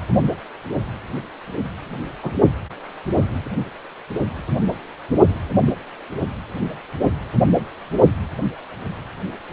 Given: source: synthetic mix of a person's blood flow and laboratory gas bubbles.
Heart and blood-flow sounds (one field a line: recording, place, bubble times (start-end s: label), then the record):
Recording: Doppler ultrasound of blood flow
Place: precordium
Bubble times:
2.23-2.31 s: bubbles
5.66-5.73 s: bubbles
From the record:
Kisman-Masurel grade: 121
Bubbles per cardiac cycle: 1 to 2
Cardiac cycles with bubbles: 10 to 50%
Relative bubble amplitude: barely perceptible (0.100 to 0.250)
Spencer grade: 2 (many but less than half of the cardiac periods contain bubble signals, singularly or in groups)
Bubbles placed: anywhere in the cardiac cycle